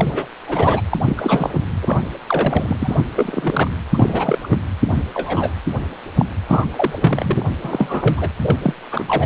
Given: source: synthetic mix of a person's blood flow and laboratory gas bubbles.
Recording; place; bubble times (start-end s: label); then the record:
Doppler ultrasound of blood flow; precordium
0.00-0.26 s: bubbles
0.47-0.81 s: bubbles
0.91-0.98 s: bubbles
1.05-1.59 s: bubbles
1.81-2.05 s: bubbles
2.27-2.76 s: bubbles
2.79-3.00 s: bubbles
3.15-3.71 s: bubbles
3.93-4.38 s: bubbles
4.43-4.47 s: bubbles
4.51-4.59 s: bubbles
4.88-5.02 s: bubbles
5.14-5.51 s: bubbles
6.18-6.25 s: bubbles
6.48-6.66 s: bubbles
6.72-7.46 s: bubbles
7.64-8.29 s: bubbles
8.43-8.56 s: bubbles
8.63-8.74 s: bubbles
8.91-9.26 s: bubbles
From the record:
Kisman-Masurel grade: 232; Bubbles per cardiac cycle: several, 3 to 8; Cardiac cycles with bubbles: 50 to 99%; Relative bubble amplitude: moderate (0.250 to 0.450); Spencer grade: 3 (all of the cardiac periods contain showers or single bubble signals, but not dominating or overriding the cardiac motion signals); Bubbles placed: anywhere in the cardiac cycle